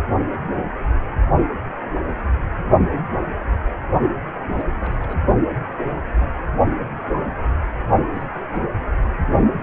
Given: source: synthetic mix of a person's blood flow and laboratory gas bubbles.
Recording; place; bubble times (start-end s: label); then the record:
Doppler ultrasound of blood flow; precordium
4.55-4.63 s: bubbles
4.80-5.14 s: bubbles
6.21-6.33 s: bubbles
7.14-7.23 s: bubbles
8.14-8.23 s: bubbles
8.53-8.69 s: bubbles
From the record:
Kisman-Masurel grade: 121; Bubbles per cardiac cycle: 1 to 2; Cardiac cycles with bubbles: 10 to 50%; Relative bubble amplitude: barely perceptible (0.100 to 0.250); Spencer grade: 2 (many but less than half of the cardiac periods contain bubble signals, singularly or in groups); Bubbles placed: only in the low amplitude regions of the cardiac cycle